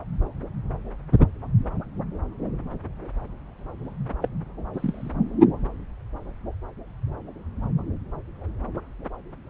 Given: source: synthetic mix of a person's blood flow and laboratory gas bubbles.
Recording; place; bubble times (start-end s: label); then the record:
Doppler ultrasound of blood flow; subclavian vein
4.22-4.28 s: bubbles
4.73-5.12 s: bubbles
From the record:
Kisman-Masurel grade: 111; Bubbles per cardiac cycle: 1 to 2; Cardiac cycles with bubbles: 1 to 10%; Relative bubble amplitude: barely perceptible (0.100 to 0.250); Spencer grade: 1 (occasional bubble signal discernible with the cardiac motion signal, with majority of cardiac periods free of bubbles); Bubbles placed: anywhere in the cardiac cycle